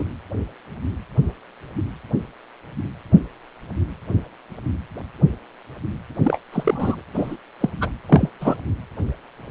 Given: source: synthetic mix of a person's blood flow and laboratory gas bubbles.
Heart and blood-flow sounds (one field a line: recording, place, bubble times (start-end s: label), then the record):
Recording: Doppler ultrasound of blood flow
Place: precordium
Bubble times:
0.00-0.04 s: bubbles
6.24-6.38 s: bubbles
6.53-7.02 s: bubbles
7.14-7.36 s: bubbles
7.60-7.70 s: bubbles
7.80-7.89 s: bubbles
8.09-8.29 s: bubbles
8.41-8.58 s: bubbles
From the record:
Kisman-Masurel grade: 222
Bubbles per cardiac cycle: several, 3 to 8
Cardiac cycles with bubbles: 10 to 50%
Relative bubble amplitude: moderate (0.250 to 0.450)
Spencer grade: 2 (many but less than half of the cardiac periods contain bubble signals, singularly or in groups)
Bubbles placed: anywhere in the cardiac cycle